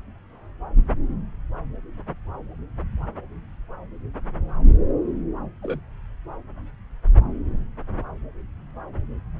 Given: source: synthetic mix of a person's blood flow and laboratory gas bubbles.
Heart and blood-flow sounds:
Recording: Doppler ultrasound of blood flow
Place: subclavian vein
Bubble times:
5.62-5.79 s: bubbles
From the record:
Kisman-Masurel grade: 111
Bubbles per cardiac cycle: 1 to 2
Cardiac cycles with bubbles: 1 to 10%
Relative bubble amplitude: barely perceptible (0.100 to 0.250)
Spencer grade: 1 (occasional bubble signal discernible with the cardiac motion signal, with majority of cardiac periods free of bubbles)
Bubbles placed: anywhere in the cardiac cycle

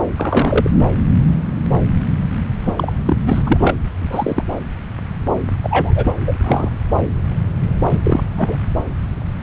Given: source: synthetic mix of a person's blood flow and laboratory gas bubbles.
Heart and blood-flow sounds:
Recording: Doppler ultrasound of blood flow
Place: subclavian vein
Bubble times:
0.17-0.70 s: bubbles
2.66-2.93 s: bubbles
3.05-3.14 s: bubbles
3.26-3.43 s: bubbles
3.46-3.75 s: bubbles
3.99-4.44 s: bubbles
5.62-6.12 s: bubbles
6.27-6.34 s: bubbles
6.44-6.69 s: bubbles
7.91-7.99 s: bubbles
8.04-8.22 s: bubbles
8.36-8.71 s: bubbles
From the record:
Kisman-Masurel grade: 233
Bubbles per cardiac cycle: several, 3 to 8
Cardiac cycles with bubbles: 50 to 99%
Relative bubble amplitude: loud (0.450 to 0.775)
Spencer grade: 3 (all of the cardiac periods contain showers or single bubble signals, but not dominating or overriding the cardiac motion signals)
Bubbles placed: anywhere in the cardiac cycle

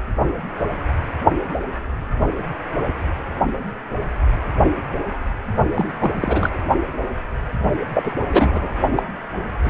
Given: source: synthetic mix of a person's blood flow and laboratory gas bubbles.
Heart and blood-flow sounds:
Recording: Doppler ultrasound of blood flow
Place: precordium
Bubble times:
5.75-5.96 s: bubbles
5.99-6.11 s: bubbles
6.15-6.50 s: bubbles
7.94-8.12 s: bubbles
8.31-8.74 s: bubbles
8.90-9.03 s: bubbles
9.63-9.70 s: bubbles
From the record:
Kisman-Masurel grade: 232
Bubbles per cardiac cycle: several, 3 to 8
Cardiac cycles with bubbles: 50 to 99%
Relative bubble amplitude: moderate (0.250 to 0.450)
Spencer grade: 3 (all of the cardiac periods contain showers or single bubble signals, but not dominating or overriding the cardiac motion signals)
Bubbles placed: only in the low amplitude regions of the cardiac cycle

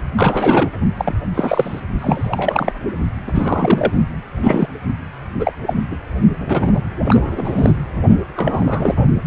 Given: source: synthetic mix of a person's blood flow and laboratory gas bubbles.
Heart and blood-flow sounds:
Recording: Doppler ultrasound of blood flow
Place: precordium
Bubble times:
0.16-0.70 s: bubbles
0.97-1.15 s: bubbles
1.34-1.80 s: bubbles
1.99-2.72 s: bubbles
3.26-3.92 s: bubbles
4.43-4.68 s: bubbles
5.40-5.53 s: bubbles
5.67-5.73 s: bubbles
5.91-5.97 s: bubbles
6.39-6.83 s: bubbles
7.04-7.72 s: bubbles
8.36-8.95 s: bubbles
From the record:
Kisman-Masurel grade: 243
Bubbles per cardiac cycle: several, 3 to 8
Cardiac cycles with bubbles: 100%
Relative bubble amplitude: loud (0.450 to 0.775)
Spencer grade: 3 (all of the cardiac periods contain showers or single bubble signals, but not dominating or overriding the cardiac motion signals)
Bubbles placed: only in the low amplitude regions of the cardiac cycle

